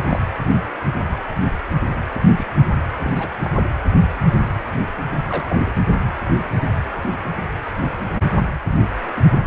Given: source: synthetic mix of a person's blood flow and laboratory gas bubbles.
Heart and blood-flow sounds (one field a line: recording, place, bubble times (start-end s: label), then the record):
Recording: Doppler ultrasound of blood flow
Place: precordium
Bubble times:
0.00-0.22 s: bubbles
2.12-2.27 s: bubbles
2.36-2.47 s: bubbles
2.58-2.67 s: bubbles
3.04-3.09 s: bubbles
3.16-3.29 s: bubbles
3.42-3.52 s: bubbles
3.54-3.63 s: bubbles
5.30-5.73 s: bubbles
9.16-9.23 s: bubbles
From the record:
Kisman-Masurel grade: 221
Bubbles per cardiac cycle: several, 3 to 8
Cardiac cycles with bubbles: 10 to 50%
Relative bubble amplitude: barely perceptible (0.100 to 0.250)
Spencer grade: 2 (many but less than half of the cardiac periods contain bubble signals, singularly or in groups)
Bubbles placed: anywhere in the cardiac cycle